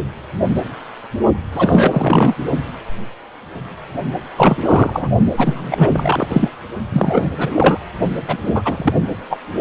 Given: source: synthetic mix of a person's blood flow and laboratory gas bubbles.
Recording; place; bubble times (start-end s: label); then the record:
Doppler ultrasound of blood flow; precordium
1.52-2.35 s: bubbles
4.37-5.09 s: bubbles
5.37-6.49 s: bubbles
6.92-7.29 s: bubbles
7.38-7.79 s: bubbles
8.28-8.38 s: bubbles
8.46-8.93 s: bubbles
9.29-9.37 s: bubbles
From the record:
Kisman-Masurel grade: 333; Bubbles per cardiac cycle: rolling drumbeat, 9 or more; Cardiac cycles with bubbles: 50 to 99%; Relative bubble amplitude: loud (0.450 to 0.775); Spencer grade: 3 (all of the cardiac periods contain showers or single bubble signals, but not dominating or overriding the cardiac motion signals); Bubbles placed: only in the low amplitude regions of the cardiac cycle